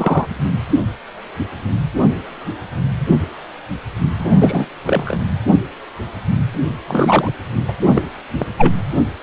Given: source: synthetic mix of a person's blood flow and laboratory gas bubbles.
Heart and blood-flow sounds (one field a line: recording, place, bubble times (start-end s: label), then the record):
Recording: Doppler ultrasound of blood flow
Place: precordium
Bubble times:
0.00-0.26 s: bubbles
4.18-4.32 s: bubbles
4.34-4.66 s: bubbles
4.83-5.19 s: bubbles
6.88-7.31 s: bubbles
7.67-7.74 s: bubbles
7.91-8.02 s: bubbles
8.38-8.46 s: bubbles
8.57-8.73 s: bubbles
From the record:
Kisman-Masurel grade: 233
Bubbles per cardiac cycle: several, 3 to 8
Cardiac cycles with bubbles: 50 to 99%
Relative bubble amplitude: loud (0.450 to 0.775)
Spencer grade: 3 (all of the cardiac periods contain showers or single bubble signals, but not dominating or overriding the cardiac motion signals)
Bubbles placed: anywhere in the cardiac cycle